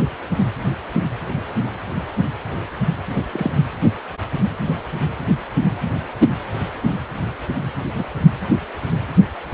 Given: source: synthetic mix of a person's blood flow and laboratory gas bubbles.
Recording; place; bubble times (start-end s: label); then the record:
Doppler ultrasound of blood flow; precordium
3.33-3.50 s: bubbles
7.95-8.04 s: bubbles
From the record:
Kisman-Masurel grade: 122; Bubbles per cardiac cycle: 1 to 2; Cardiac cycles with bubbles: 10 to 50%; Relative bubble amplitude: moderate (0.250 to 0.450); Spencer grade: 2 (many but less than half of the cardiac periods contain bubble signals, singularly or in groups); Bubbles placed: anywhere in the cardiac cycle